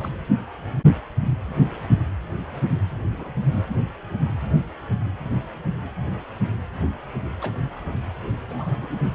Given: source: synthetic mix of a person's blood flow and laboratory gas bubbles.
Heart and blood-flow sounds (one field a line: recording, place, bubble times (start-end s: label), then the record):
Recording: Doppler ultrasound of blood flow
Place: precordium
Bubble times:
0.00-0.09 s: bubbles
3.12-3.31 s: bubbles
3.52-3.59 s: bubbles
7.42-7.51 s: bubbles
8.48-8.74 s: bubbles
8.81-8.88 s: bubbles
From the record:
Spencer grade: 2 (many but less than half of the cardiac periods contain bubble signals, singularly or in groups)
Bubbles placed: anywhere in the cardiac cycle